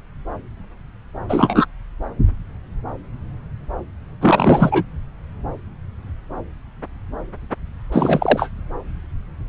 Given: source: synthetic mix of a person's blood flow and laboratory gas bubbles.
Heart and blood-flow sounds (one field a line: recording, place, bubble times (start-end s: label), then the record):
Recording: Doppler ultrasound of blood flow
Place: subclavian vein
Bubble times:
1.29-1.66 s: bubbles
4.21-4.83 s: bubbles
7.92-8.49 s: bubbles
From the record:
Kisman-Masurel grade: 223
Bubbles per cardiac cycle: several, 3 to 8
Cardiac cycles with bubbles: 10 to 50%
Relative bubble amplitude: loud (0.450 to 0.775)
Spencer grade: 2 (many but less than half of the cardiac periods contain bubble signals, singularly or in groups)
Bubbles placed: anywhere in the cardiac cycle